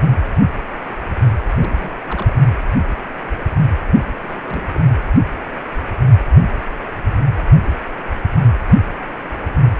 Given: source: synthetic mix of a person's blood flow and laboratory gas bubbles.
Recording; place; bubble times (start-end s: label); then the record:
Doppler ultrasound of blood flow; precordium
1.56-1.72 s: bubbles
1.79-1.92 s: bubbles
2.06-2.33 s: bubbles
4.22-4.69 s: bubbles
4.75-4.80 s: bubbles
From the record:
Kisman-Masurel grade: 221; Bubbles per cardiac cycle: several, 3 to 8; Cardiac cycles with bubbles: 10 to 50%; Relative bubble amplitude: barely perceptible (0.100 to 0.250); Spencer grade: 2 (many but less than half of the cardiac periods contain bubble signals, singularly or in groups); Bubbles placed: anywhere in the cardiac cycle